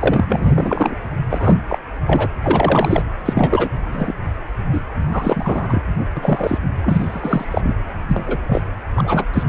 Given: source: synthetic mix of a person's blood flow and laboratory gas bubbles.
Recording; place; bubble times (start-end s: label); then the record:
Doppler ultrasound of blood flow; precordium
0.00-0.25 s: bubbles
0.29-0.96 s: bubbles
1.29-1.57 s: bubbles
1.69-1.78 s: bubbles
2.07-2.29 s: bubbles
2.42-3.03 s: bubbles
3.25-3.70 s: bubbles
3.83-4.13 s: bubbles
4.72-4.80 s: bubbles
5.12-5.83 s: bubbles
6.17-6.58 s: bubbles
6.83-7.76 s: bubbles
8.07-8.38 s: bubbles
8.47-8.63 s: bubbles
8.95-9.25 s: bubbles
9.33-9.44 s: bubbles
From the record:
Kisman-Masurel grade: 343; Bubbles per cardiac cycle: rolling drumbeat, 9 or more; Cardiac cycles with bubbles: 100%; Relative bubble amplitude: loud (0.450 to 0.775); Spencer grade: 3 (all of the cardiac periods contain showers or single bubble signals, but not dominating or overriding the cardiac motion signals); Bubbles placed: anywhere in the cardiac cycle